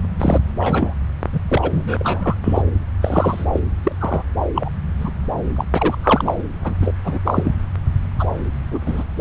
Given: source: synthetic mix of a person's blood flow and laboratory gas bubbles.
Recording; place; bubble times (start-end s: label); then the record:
Doppler ultrasound of blood flow; subclavian vein
0.20-0.43 s: bubbles
0.58-0.94 s: bubbles
1.32-1.40 s: bubbles
1.44-2.36 s: bubbles
2.43-2.62 s: bubbles
3.00-3.45 s: bubbles
3.52-3.60 s: bubbles
3.83-3.92 s: bubbles
4.00-4.23 s: bubbles
4.54-4.70 s: bubbles
4.98-5.11 s: bubbles
5.56-5.65 s: bubbles
5.73-5.97 s: bubbles
6.02-6.43 s: bubbles
6.64-6.75 s: bubbles
6.82-6.92 s: bubbles
7.04-7.19 s: bubbles
7.25-7.53 s: bubbles
8.19-8.26 s: bubbles
8.71-8.80 s: bubbles
8.86-9.04 s: bubbles
9.16-9.21 s: bubbles
From the record:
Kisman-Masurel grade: 342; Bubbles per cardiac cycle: rolling drumbeat, 9 or more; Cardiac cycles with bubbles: 100%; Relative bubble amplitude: moderate (0.250 to 0.450); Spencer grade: 3 (all of the cardiac periods contain showers or single bubble signals, but not dominating or overriding the cardiac motion signals); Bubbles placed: anywhere in the cardiac cycle